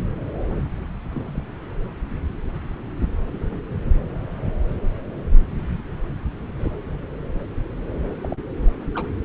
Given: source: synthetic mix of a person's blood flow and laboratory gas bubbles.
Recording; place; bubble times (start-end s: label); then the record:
Doppler ultrasound of blood flow; subclavian vein
1.12-1.46 s: bubbles
3.33-3.60 s: bubbles
3.85-3.90 s: bubbles
6.59-6.72 s: bubbles
8.21-8.37 s: bubbles
8.94-9.07 s: bubbles
From the record:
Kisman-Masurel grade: 121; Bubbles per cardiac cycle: 1 to 2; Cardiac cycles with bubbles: 10 to 50%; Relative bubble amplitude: barely perceptible (0.100 to 0.250); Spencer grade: 2 (many but less than half of the cardiac periods contain bubble signals, singularly or in groups); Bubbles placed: anywhere in the cardiac cycle